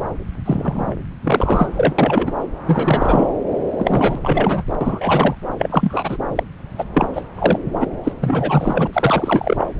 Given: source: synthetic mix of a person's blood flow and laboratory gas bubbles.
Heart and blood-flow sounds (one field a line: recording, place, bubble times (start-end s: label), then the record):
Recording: Doppler ultrasound of blood flow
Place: subclavian vein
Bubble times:
0.45-0.94 s: bubbles
1.23-1.70 s: bubbles
1.77-1.95 s: bubbles
1.98-2.31 s: bubbles
2.67-3.26 s: bubbles
3.78-4.19 s: bubbles
4.21-4.63 s: bubbles
4.80-5.35 s: bubbles
5.58-6.17 s: bubbles
6.35-6.43 s: bubbles
6.78-6.84 s: bubbles
6.94-7.07 s: bubbles
7.15-7.22 s: bubbles
7.38-7.58 s: bubbles
7.80-7.87 s: bubbles
8.03-8.12 s: bubbles
8.20-8.88 s: bubbles
8.93-9.67 s: bubbles
From the record:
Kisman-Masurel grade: 343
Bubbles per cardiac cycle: rolling drumbeat, 9 or more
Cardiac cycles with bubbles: 100%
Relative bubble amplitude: loud (0.450 to 0.775)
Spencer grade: 3 (all of the cardiac periods contain showers or single bubble signals, but not dominating or overriding the cardiac motion signals)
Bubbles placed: anywhere in the cardiac cycle